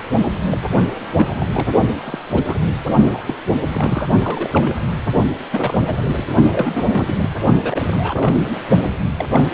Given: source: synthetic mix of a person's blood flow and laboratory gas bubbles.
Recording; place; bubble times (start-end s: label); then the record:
Doppler ultrasound of blood flow; precordium
0.51-0.57 s: bubbles
0.73-0.84 s: bubbles
1.15-1.47 s: bubbles
1.53-1.69 s: bubbles
2.05-2.18 s: bubbles
2.34-2.42 s: bubbles
2.47-2.56 s: bubbles
3.12-3.22 s: bubbles
3.26-3.35 s: bubbles
3.68-4.08 s: bubbles
4.22-4.75 s: bubbles
5.52-5.98 s: bubbles
6.06-6.24 s: bubbles
6.50-7.29 s: bubbles
7.62-7.81 s: bubbles
7.87-8.58 s: bubbles
9.18-9.26 s: bubbles
9.33-9.44 s: bubbles
From the record:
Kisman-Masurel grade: 242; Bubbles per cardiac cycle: several, 3 to 8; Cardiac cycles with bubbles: 100%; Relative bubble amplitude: moderate (0.250 to 0.450); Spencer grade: 3 (all of the cardiac periods contain showers or single bubble signals, but not dominating or overriding the cardiac motion signals); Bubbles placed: only in the low amplitude regions of the cardiac cycle